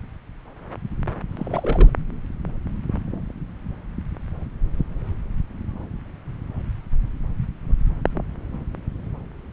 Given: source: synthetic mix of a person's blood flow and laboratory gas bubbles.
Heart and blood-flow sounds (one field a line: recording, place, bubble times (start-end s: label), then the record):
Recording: Doppler ultrasound of blood flow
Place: subclavian vein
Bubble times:
1.30-1.90 s: bubbles
From the record:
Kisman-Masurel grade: 211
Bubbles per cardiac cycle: several, 3 to 8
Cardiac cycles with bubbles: 1 to 10%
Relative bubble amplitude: barely perceptible (0.100 to 0.250)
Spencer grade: 1 (occasional bubble signal discernible with the cardiac motion signal, with majority of cardiac periods free of bubbles)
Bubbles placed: anywhere in the cardiac cycle